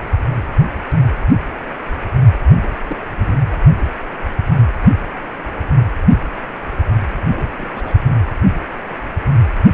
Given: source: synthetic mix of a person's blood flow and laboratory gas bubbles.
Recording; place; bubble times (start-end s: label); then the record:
Doppler ultrasound of blood flow; precordium
2.62-2.69 s: bubbles
2.89-2.97 s: bubbles
3.15-3.41 s: bubbles
7.24-7.54 s: bubbles
7.58-7.66 s: bubbles
7.72-8.00 s: bubbles
From the record:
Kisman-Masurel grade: 221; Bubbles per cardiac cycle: several, 3 to 8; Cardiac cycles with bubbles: 10 to 50%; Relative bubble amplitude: barely perceptible (0.100 to 0.250); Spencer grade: 2 (many but less than half of the cardiac periods contain bubble signals, singularly or in groups); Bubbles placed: anywhere in the cardiac cycle